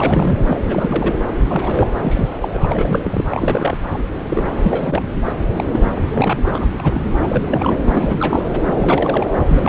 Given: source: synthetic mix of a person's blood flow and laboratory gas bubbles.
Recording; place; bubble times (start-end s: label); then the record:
Doppler ultrasound of blood flow; subclavian vein
0.00-0.36 s: bubbles
0.47-0.57 s: bubbles
0.61-1.15 s: bubbles
1.47-1.87 s: bubbles
1.97-2.27 s: bubbles
2.42-2.51 s: bubbles
2.54-2.67 s: bubbles
2.71-3.25 s: bubbles
3.29-3.77 s: bubbles
3.90-4.03 s: bubbles
4.29-4.50 s: bubbles
4.62-5.15 s: bubbles
5.24-5.32 s: bubbles
5.56-5.65 s: bubbles
5.71-5.79 s: bubbles
5.94-6.41 s: bubbles
6.45-6.67 s: bubbles
6.79-7.01 s: bubbles
7.20-7.77 s: bubbles
7.86-8.49 s: bubbles
8.64-9.31 s: bubbles
9.50-9.69 s: bubbles
From the record:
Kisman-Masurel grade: 342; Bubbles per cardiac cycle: rolling drumbeat, 9 or more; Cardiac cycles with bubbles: 100%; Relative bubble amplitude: moderate (0.250 to 0.450); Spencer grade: 3 (all of the cardiac periods contain showers or single bubble signals, but not dominating or overriding the cardiac motion signals); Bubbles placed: anywhere in the cardiac cycle